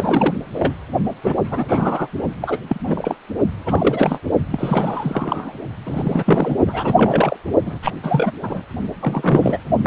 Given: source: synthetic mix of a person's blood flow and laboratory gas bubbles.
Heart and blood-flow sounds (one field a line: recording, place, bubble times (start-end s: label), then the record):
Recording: Doppler ultrasound of blood flow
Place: precordium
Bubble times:
0.00-0.35 s: bubbles
0.52-0.75 s: bubbles
1.21-1.66 s: bubbles
1.68-2.07 s: bubbles
2.41-2.58 s: bubbles
2.67-2.80 s: bubbles
2.86-3.15 s: bubbles
3.65-4.19 s: bubbles
4.51-5.52 s: bubbles
5.86-6.57 s: bubbles
6.66-7.37 s: bubbles
7.65-7.79 s: bubbles
7.82-7.92 s: bubbles
8.03-8.31 s: bubbles
8.42-8.62 s: bubbles
9.00-9.58 s: bubbles
9.82-9.87 s: bubbles
From the record:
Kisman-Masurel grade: 343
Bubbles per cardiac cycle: rolling drumbeat, 9 or more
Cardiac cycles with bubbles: 100%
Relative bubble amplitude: loud (0.450 to 0.775)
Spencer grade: 3 (all of the cardiac periods contain showers or single bubble signals, but not dominating or overriding the cardiac motion signals)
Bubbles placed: only in the low amplitude regions of the cardiac cycle